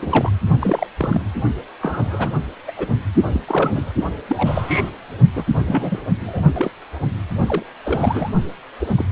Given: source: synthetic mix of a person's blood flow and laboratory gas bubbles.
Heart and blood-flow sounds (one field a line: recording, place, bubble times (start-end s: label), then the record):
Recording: Doppler ultrasound of blood flow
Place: precordium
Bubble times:
0.00-0.32 s: bubbles
0.59-0.87 s: bubbles
0.97-1.21 s: bubbles
1.82-2.30 s: bubbles
2.68-2.95 s: bubbles
3.33-3.41 s: bubbles
3.47-3.94 s: bubbles
4.28-4.90 s: bubbles
5.36-5.43 s: bubbles
5.66-6.01 s: bubbles
6.19-6.41 s: bubbles
6.54-6.71 s: bubbles
7.46-7.63 s: bubbles
7.84-8.30 s: bubbles
8.80-8.87 s: bubbles
8.95-9.05 s: bubbles
From the record:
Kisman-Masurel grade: 242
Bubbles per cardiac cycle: several, 3 to 8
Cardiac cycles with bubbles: 100%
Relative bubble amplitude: moderate (0.250 to 0.450)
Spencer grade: 3 (all of the cardiac periods contain showers or single bubble signals, but not dominating or overriding the cardiac motion signals)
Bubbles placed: only in the low amplitude regions of the cardiac cycle